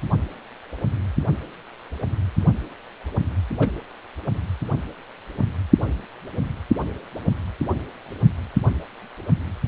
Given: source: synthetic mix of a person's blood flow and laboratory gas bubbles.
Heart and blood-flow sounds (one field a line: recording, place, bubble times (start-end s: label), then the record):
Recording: Doppler ultrasound of blood flow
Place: precordium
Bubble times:
3.59-3.71 s: bubbles
From the record:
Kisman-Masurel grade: 112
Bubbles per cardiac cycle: 1 to 2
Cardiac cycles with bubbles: 1 to 10%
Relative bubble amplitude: moderate (0.250 to 0.450)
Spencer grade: 1 (occasional bubble signal discernible with the cardiac motion signal, with majority of cardiac periods free of bubbles)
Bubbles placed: anywhere in the cardiac cycle